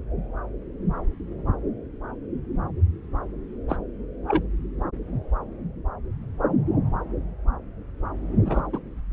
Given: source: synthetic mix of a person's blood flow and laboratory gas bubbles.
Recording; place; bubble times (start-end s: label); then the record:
Doppler ultrasound of blood flow; subclavian vein
3.69-3.77 s: bubbles
4.27-4.42 s: bubbles
8.45-8.61 s: bubbles
8.73-8.79 s: bubbles
From the record:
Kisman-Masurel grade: 122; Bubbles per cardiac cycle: 1 to 2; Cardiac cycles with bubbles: 10 to 50%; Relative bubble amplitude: moderate (0.250 to 0.450); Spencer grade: 2 (many but less than half of the cardiac periods contain bubble signals, singularly or in groups); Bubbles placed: anywhere in the cardiac cycle